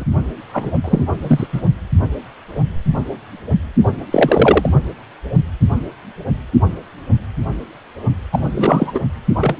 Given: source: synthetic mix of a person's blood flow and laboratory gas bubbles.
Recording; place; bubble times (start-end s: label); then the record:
Doppler ultrasound of blood flow; precordium
0.00-0.04 s: bubbles
0.53-0.71 s: bubbles
0.84-1.04 s: bubbles
1.22-1.47 s: bubbles
1.52-1.61 s: bubbles
4.11-4.70 s: bubbles
8.32-8.41 s: bubbles
8.55-8.99 s: bubbles
9.40-9.55 s: bubbles
From the record:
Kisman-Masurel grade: 233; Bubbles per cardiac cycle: several, 3 to 8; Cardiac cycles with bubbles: 50 to 99%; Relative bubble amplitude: loud (0.450 to 0.775); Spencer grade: 3 (all of the cardiac periods contain showers or single bubble signals, but not dominating or overriding the cardiac motion signals); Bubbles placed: only in the low amplitude regions of the cardiac cycle